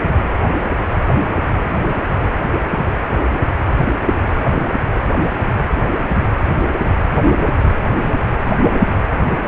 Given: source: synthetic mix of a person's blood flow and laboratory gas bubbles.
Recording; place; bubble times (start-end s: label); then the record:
Doppler ultrasound of blood flow; precordium
no bubbles
From the record:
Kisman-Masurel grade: 000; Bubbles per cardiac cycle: 0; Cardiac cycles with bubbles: 0%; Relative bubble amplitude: no bubbles discernible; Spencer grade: 0 (complete lack of bubble signals)